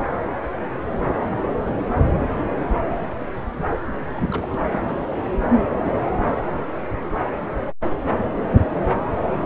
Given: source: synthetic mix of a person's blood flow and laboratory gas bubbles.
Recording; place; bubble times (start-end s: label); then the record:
Doppler ultrasound of blood flow; subclavian vein
4.12-4.79 s: bubbles
From the record:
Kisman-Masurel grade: 211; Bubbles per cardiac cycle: several, 3 to 8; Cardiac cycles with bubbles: 1 to 10%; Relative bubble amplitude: barely perceptible (0.100 to 0.250); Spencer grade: 1 (occasional bubble signal discernible with the cardiac motion signal, with majority of cardiac periods free of bubbles); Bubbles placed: anywhere in the cardiac cycle